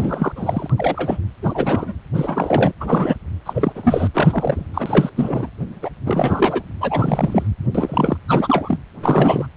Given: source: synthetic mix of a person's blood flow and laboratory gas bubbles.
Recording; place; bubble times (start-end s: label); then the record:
Doppler ultrasound of blood flow; precordium
0.00-0.32 s: bubbles
0.35-0.73 s: bubbles
0.76-1.19 s: bubbles
1.42-1.93 s: bubbles
2.13-2.73 s: bubbles
2.80-3.15 s: bubbles
3.46-3.73 s: bubbles
3.75-4.08 s: bubbles
4.13-4.67 s: bubbles
4.74-5.09 s: bubbles
5.16-5.51 s: bubbles
5.82-5.89 s: bubbles
6.05-6.62 s: bubbles
6.80-7.47 s: bubbles
7.75-8.17 s: bubbles
8.28-8.79 s: bubbles
9.01-9.47 s: bubbles
From the record:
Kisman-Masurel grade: 343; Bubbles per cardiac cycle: rolling drumbeat, 9 or more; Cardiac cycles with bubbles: 100%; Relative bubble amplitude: loud (0.450 to 0.775); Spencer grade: 3 (all of the cardiac periods contain showers or single bubble signals, but not dominating or overriding the cardiac motion signals); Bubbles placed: anywhere in the cardiac cycle